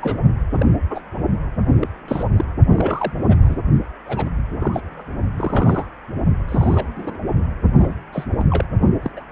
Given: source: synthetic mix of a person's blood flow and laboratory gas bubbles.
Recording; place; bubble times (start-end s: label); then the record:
Doppler ultrasound of blood flow; precordium
0.00-0.20 s: bubbles
0.53-0.67 s: bubbles
0.90-1.01 s: bubbles
1.79-1.89 s: bubbles
2.08-2.23 s: bubbles
2.36-2.44 s: bubbles
2.69-3.12 s: bubbles
3.28-3.59 s: bubbles
4.05-4.29 s: bubbles
4.59-5.05 s: bubbles
5.37-5.86 s: bubbles
6.49-7.17 s: bubbles
7.78-7.94 s: bubbles
8.12-8.25 s: bubbles
8.38-8.44 s: bubbles
8.50-8.65 s: bubbles
9.03-9.11 s: bubbles
9.16-9.23 s: bubbles
From the record:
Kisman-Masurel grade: 242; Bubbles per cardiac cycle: several, 3 to 8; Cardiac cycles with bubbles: 100%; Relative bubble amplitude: moderate (0.250 to 0.450); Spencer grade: 3 (all of the cardiac periods contain showers or single bubble signals, but not dominating or overriding the cardiac motion signals); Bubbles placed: only in the low amplitude regions of the cardiac cycle